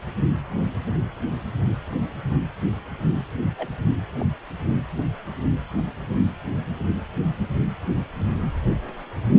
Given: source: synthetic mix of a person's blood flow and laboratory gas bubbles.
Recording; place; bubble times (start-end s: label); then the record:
Doppler ultrasound of blood flow; precordium
3.58-3.68 s: bubbles
4.20-4.25 s: bubbles
From the record:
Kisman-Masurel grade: 111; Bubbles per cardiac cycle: 1 to 2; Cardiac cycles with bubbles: 1 to 10%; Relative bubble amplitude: barely perceptible (0.100 to 0.250); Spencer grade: 1 (occasional bubble signal discernible with the cardiac motion signal, with majority of cardiac periods free of bubbles); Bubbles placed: anywhere in the cardiac cycle